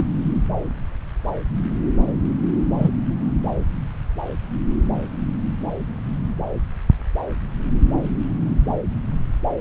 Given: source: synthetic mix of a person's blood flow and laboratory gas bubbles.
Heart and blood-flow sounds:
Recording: Doppler ultrasound of blood flow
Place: subclavian vein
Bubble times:
0.00-0.07 s: bubbles
2.77-2.91 s: bubbles
From the record:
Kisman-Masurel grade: 122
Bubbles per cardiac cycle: 1 to 2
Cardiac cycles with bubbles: 10 to 50%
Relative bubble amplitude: moderate (0.250 to 0.450)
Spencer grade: 2 (many but less than half of the cardiac periods contain bubble signals, singularly or in groups)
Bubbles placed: anywhere in the cardiac cycle

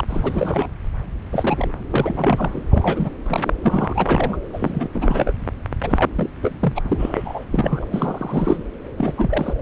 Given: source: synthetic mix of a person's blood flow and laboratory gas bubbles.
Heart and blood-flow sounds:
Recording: Doppler ultrasound of blood flow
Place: subclavian vein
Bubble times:
0.00-0.04 s: bubbles
0.08-0.68 s: bubbles
1.32-1.72 s: bubbles
1.90-2.62 s: bubbles
2.70-3.10 s: bubbles
3.23-3.55 s: bubbles
3.62-4.41 s: bubbles
4.53-4.88 s: bubbles
4.93-5.33 s: bubbles
5.83-6.10 s: bubbles
6.16-6.29 s: bubbles
6.42-6.82 s: bubbles
6.84-7.45 s: bubbles
7.50-7.88 s: bubbles
7.91-8.64 s: bubbles
8.97-9.12 s: bubbles
9.16-9.53 s: bubbles
From the record:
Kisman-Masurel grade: 332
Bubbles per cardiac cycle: rolling drumbeat, 9 or more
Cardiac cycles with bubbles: 50 to 99%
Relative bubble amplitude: moderate (0.250 to 0.450)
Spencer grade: 3 (all of the cardiac periods contain showers or single bubble signals, but not dominating or overriding the cardiac motion signals)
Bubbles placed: anywhere in the cardiac cycle

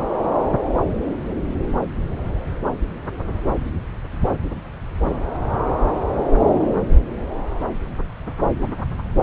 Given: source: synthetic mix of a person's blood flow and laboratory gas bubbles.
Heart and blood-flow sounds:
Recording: Doppler ultrasound of blood flow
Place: subclavian vein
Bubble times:
no bubbles
From the record:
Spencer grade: 0 (complete lack of bubble signals)

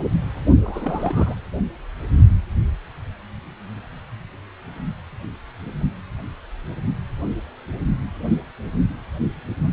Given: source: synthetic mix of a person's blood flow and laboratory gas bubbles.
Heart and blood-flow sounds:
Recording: Doppler ultrasound of blood flow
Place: precordium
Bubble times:
0.62-1.35 s: bubbles
From the record:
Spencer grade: 2 (many but less than half of the cardiac periods contain bubble signals, singularly or in groups)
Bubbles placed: only in the low amplitude regions of the cardiac cycle

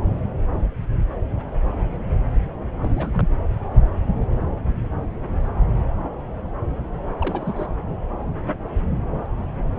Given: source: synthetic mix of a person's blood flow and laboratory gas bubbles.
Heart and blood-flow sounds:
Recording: Doppler ultrasound of blood flow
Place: subclavian vein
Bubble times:
2.82-3.10 s: bubbles
3.14-3.28 s: bubbles
7.21-7.67 s: bubbles
From the record:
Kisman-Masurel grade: 211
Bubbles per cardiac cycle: several, 3 to 8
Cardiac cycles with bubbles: 1 to 10%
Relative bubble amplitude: barely perceptible (0.100 to 0.250)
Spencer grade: 1 (occasional bubble signal discernible with the cardiac motion signal, with majority of cardiac periods free of bubbles)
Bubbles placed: anywhere in the cardiac cycle

